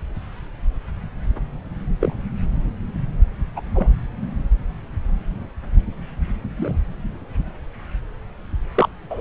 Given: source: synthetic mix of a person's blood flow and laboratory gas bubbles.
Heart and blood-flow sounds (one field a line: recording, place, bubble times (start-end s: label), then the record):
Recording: Doppler ultrasound of blood flow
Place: subclavian vein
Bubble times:
2.00-2.14 s: bubbles
3.56-3.61 s: bubbles
3.74-3.89 s: bubbles
4.21-4.28 s: bubbles
6.57-6.75 s: bubbles
8.75-8.89 s: bubbles
9.10-9.21 s: bubbles
From the record:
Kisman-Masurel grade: 123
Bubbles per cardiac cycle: 1 to 2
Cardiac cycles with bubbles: 10 to 50%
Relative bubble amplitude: loud (0.450 to 0.775)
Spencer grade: 2 (many but less than half of the cardiac periods contain bubble signals, singularly or in groups)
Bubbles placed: anywhere in the cardiac cycle